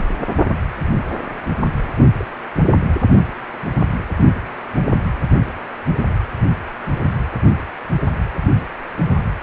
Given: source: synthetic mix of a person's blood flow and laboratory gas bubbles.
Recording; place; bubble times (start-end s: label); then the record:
Doppler ultrasound of blood flow; precordium
2.17-2.25 s: bubbles
From the record:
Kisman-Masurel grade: 111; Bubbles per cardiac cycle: 1 to 2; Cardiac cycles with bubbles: 1 to 10%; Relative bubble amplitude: barely perceptible (0.100 to 0.250); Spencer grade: 1 (occasional bubble signal discernible with the cardiac motion signal, with majority of cardiac periods free of bubbles); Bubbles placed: anywhere in the cardiac cycle